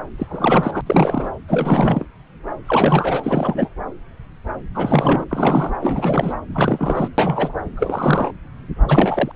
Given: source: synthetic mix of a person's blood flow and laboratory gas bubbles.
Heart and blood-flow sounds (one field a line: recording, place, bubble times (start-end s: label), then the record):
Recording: Doppler ultrasound of blood flow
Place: subclavian vein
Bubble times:
0.18-0.81 s: bubbles
0.86-1.32 s: bubbles
1.48-2.05 s: bubbles
2.65-3.69 s: bubbles
4.75-5.25 s: bubbles
5.29-5.76 s: bubbles
5.82-6.33 s: bubbles
6.54-7.08 s: bubbles
7.18-7.58 s: bubbles
7.77-8.31 s: bubbles
8.88-9.31 s: bubbles
From the record:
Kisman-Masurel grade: 332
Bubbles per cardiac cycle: rolling drumbeat, 9 or more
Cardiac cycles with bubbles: 50 to 99%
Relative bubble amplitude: moderate (0.250 to 0.450)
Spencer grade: 3 (all of the cardiac periods contain showers or single bubble signals, but not dominating or overriding the cardiac motion signals)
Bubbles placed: anywhere in the cardiac cycle